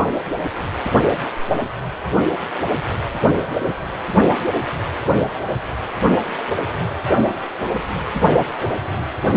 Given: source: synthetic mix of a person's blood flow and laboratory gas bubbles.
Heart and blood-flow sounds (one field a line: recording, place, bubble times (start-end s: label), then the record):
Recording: Doppler ultrasound of blood flow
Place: precordium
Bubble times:
no bubbles
From the record:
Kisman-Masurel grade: 000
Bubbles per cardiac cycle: 0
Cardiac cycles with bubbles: 0%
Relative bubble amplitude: no bubbles discernible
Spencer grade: 0 (complete lack of bubble signals)